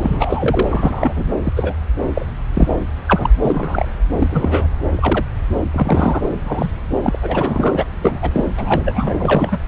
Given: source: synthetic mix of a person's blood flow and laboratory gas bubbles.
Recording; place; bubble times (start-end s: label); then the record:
Doppler ultrasound of blood flow; subclavian vein
0.01-0.63 s: bubbles
0.69-1.25 s: bubbles
1.44-1.52 s: bubbles
1.56-1.73 s: bubbles
2.15-2.26 s: bubbles
2.54-2.75 s: bubbles
3.08-3.33 s: bubbles
3.43-3.88 s: bubbles
4.19-4.27 s: bubbles
4.31-4.68 s: bubbles
4.95-5.27 s: bubbles
5.73-6.22 s: bubbles
6.44-6.70 s: bubbles
7.03-7.19 s: bubbles
7.21-7.89 s: bubbles
8.02-8.19 s: bubbles
8.21-8.46 s: bubbles
8.57-9.15 s: bubbles
9.19-9.59 s: bubbles
From the record:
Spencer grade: 3 (all of the cardiac periods contain showers or single bubble signals, but not dominating or overriding the cardiac motion signals); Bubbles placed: anywhere in the cardiac cycle